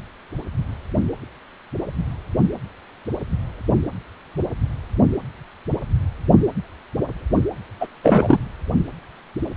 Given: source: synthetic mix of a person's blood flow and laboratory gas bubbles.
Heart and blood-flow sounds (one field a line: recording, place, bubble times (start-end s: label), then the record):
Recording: Doppler ultrasound of blood flow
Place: precordium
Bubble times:
7.80-7.88 s: bubbles
8.04-8.38 s: bubbles
From the record:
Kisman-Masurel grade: 223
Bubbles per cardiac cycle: several, 3 to 8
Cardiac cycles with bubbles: 10 to 50%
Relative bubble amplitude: loud (0.450 to 0.775)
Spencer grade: 2 (many but less than half of the cardiac periods contain bubble signals, singularly or in groups)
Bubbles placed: only in the low amplitude regions of the cardiac cycle